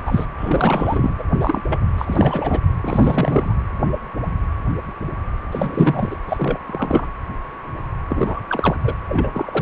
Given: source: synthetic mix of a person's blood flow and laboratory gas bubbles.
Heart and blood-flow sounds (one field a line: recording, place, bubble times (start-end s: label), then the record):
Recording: Doppler ultrasound of blood flow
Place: precordium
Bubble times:
0.05-0.26 s: bubbles
0.38-1.13 s: bubbles
1.18-1.23 s: bubbles
1.40-1.62 s: bubbles
1.68-1.79 s: bubbles
1.98-2.60 s: bubbles
2.83-3.54 s: bubbles
5.51-6.17 s: bubbles
6.29-6.58 s: bubbles
6.67-7.07 s: bubbles
8.09-8.40 s: bubbles
8.49-8.76 s: bubbles
8.84-8.94 s: bubbles
9.08-9.61 s: bubbles
From the record:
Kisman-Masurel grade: 332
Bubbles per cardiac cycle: rolling drumbeat, 9 or more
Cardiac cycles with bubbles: 50 to 99%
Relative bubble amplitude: moderate (0.250 to 0.450)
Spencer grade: 3 (all of the cardiac periods contain showers or single bubble signals, but not dominating or overriding the cardiac motion signals)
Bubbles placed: anywhere in the cardiac cycle